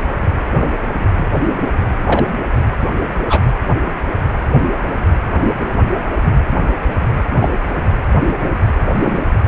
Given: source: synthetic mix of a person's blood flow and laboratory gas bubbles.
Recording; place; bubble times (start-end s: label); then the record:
Doppler ultrasound of blood flow; precordium
0.60-0.71 s: bubbles
2.06-2.25 s: bubbles
3.26-3.41 s: bubbles
7.40-7.50 s: bubbles
8.93-9.19 s: bubbles
From the record:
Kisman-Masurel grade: 123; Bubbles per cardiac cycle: 1 to 2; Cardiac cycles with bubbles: 10 to 50%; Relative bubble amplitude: loud (0.450 to 0.775); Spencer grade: 2 (many but less than half of the cardiac periods contain bubble signals, singularly or in groups); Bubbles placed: anywhere in the cardiac cycle